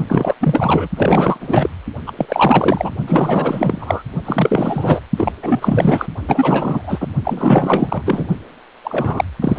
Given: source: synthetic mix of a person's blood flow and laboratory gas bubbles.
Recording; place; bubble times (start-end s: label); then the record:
Doppler ultrasound of blood flow; precordium
0.09-0.34 s: bubbles
0.41-0.88 s: bubbles
0.96-1.37 s: bubbles
1.40-1.69 s: bubbles
2.06-2.12 s: bubbles
2.17-2.26 s: bubbles
2.28-2.92 s: bubbles
3.06-4.03 s: bubbles
4.25-5.00 s: bubbles
5.16-5.32 s: bubbles
5.42-6.06 s: bubbles
6.28-7.08 s: bubbles
7.24-8.29 s: bubbles
8.84-9.24 s: bubbles
9.42-9.59 s: bubbles
From the record:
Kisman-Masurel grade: 444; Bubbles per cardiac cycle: continuous sound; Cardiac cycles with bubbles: 100%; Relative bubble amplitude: maximal (0.775 to 0.999); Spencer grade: 4 (maximum detectable bubble signal sounding continuously throughout systole and diastole of every cardiac period, and overriding the amplitude of the normal cardiac signals); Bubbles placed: only in the low amplitude regions of the cardiac cycle